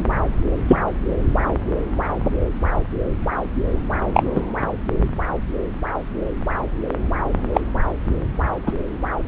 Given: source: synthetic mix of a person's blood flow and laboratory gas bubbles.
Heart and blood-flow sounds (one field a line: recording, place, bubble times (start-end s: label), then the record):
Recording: Doppler ultrasound of blood flow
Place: subclavian vein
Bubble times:
0.68-0.78 s: bubbles
4.14-4.22 s: bubbles
4.36-4.42 s: bubbles
7.54-7.61 s: bubbles
8.66-8.72 s: bubbles
From the record:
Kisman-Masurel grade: 123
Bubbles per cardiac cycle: 1 to 2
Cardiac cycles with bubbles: 10 to 50%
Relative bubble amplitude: loud (0.450 to 0.775)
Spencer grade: 2 (many but less than half of the cardiac periods contain bubble signals, singularly or in groups)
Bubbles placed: anywhere in the cardiac cycle